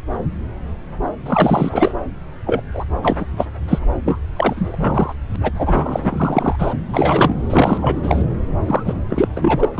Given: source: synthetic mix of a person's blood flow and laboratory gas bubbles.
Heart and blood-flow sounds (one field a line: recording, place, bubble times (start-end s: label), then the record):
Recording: Doppler ultrasound of blood flow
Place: subclavian vein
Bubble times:
1.26-1.93 s: bubbles
2.45-2.61 s: bubbles
2.73-2.85 s: bubbles
3.02-3.17 s: bubbles
3.19-3.25 s: bubbles
3.36-3.46 s: bubbles
3.68-3.79 s: bubbles
4.05-4.19 s: bubbles
4.36-5.14 s: bubbles
5.33-5.36 s: bubbles
5.43-5.51 s: bubbles
5.58-6.56 s: bubbles
6.58-6.74 s: bubbles
6.92-7.35 s: bubbles
7.50-8.24 s: bubbles
8.65-8.94 s: bubbles
9.09-9.28 s: bubbles
9.36-9.69 s: bubbles
9.78-9.80 s: bubbles
From the record:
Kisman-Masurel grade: 333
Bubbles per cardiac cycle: rolling drumbeat, 9 or more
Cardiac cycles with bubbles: 50 to 99%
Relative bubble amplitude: loud (0.450 to 0.775)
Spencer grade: 3 (all of the cardiac periods contain showers or single bubble signals, but not dominating or overriding the cardiac motion signals)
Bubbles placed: anywhere in the cardiac cycle